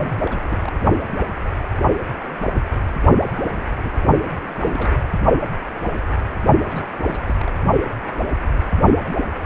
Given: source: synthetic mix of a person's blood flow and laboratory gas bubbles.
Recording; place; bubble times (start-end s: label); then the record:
Doppler ultrasound of blood flow; precordium
0.00-0.13 s: bubbles
0.26-0.71 s: bubbles
3.21-3.45 s: bubbles
3.56-3.63 s: bubbles
3.83-3.90 s: bubbles
4.36-4.94 s: bubbles
6.67-6.88 s: bubbles
6.96-7.50 s: bubbles
From the record:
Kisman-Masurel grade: 221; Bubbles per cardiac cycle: several, 3 to 8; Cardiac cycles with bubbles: 10 to 50%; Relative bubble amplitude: barely perceptible (0.100 to 0.250); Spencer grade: 2 (many but less than half of the cardiac periods contain bubble signals, singularly or in groups); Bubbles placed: only in the low amplitude regions of the cardiac cycle